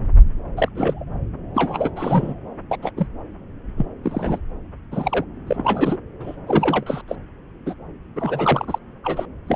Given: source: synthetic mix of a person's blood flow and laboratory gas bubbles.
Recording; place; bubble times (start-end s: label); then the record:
Doppler ultrasound of blood flow; subclavian vein
0.56-0.68 s: bubbles
0.75-1.04 s: bubbles
1.54-1.90 s: bubbles
1.96-2.35 s: bubbles
2.71-2.78 s: bubbles
2.82-2.91 s: bubbles
2.96-3.07 s: bubbles
3.77-3.85 s: bubbles
4.03-4.39 s: bubbles
4.91-5.25 s: bubbles
5.47-5.98 s: bubbles
6.20-6.37 s: bubbles
6.47-7.02 s: bubbles
7.08-7.16 s: bubbles
7.66-7.75 s: bubbles
8.16-8.79 s: bubbles
9.04-9.26 s: bubbles
9.49-9.56 s: bubbles
From the record:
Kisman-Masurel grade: 232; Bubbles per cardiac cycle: several, 3 to 8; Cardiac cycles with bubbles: 50 to 99%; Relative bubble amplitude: moderate (0.250 to 0.450); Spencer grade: 3 (all of the cardiac periods contain showers or single bubble signals, but not dominating or overriding the cardiac motion signals); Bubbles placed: anywhere in the cardiac cycle